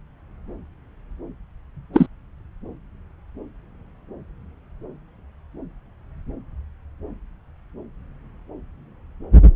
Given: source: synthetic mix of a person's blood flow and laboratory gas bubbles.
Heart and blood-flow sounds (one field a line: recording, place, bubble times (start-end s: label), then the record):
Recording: Doppler ultrasound of blood flow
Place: subclavian vein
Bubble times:
1.94-2.07 s: bubbles
From the record:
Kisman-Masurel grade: 123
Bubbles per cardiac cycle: 1 to 2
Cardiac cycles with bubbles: 10 to 50%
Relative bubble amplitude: loud (0.450 to 0.775)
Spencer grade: 2 (many but less than half of the cardiac periods contain bubble signals, singularly or in groups)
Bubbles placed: anywhere in the cardiac cycle